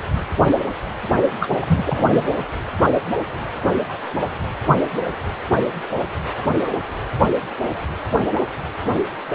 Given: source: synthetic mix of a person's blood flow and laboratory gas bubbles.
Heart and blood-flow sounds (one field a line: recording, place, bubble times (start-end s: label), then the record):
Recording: Doppler ultrasound of blood flow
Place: precordium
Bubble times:
1.40-1.47 s: bubbles
1.62-2.31 s: bubbles
From the record:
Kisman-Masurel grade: 212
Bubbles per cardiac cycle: several, 3 to 8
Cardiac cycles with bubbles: 1 to 10%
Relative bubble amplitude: moderate (0.250 to 0.450)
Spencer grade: 1 (occasional bubble signal discernible with the cardiac motion signal, with majority of cardiac periods free of bubbles)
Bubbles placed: anywhere in the cardiac cycle